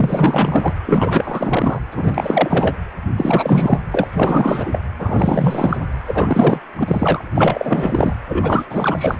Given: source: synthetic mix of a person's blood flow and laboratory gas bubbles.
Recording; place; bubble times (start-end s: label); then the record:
Doppler ultrasound of blood flow; precordium
0.00-0.73 s: bubbles
0.86-1.79 s: bubbles
1.92-2.76 s: bubbles
3.16-3.81 s: bubbles
3.90-4.08 s: bubbles
4.12-4.79 s: bubbles
4.99-5.77 s: bubbles
6.07-6.60 s: bubbles
6.78-7.25 s: bubbles
7.35-8.13 s: bubbles
8.28-8.65 s: bubbles
8.70-9.20 s: bubbles
From the record:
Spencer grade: 4 (maximum detectable bubble signal sounding continuously throughout systole and diastole of every cardiac period, and overriding the amplitude of the normal cardiac signals); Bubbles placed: anywhere in the cardiac cycle